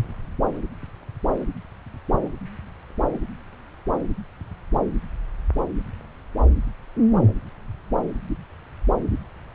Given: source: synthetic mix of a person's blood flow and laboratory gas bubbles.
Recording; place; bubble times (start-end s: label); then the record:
Doppler ultrasound of blood flow; subclavian vein
no bubbles
From the record:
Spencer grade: 0 (complete lack of bubble signals)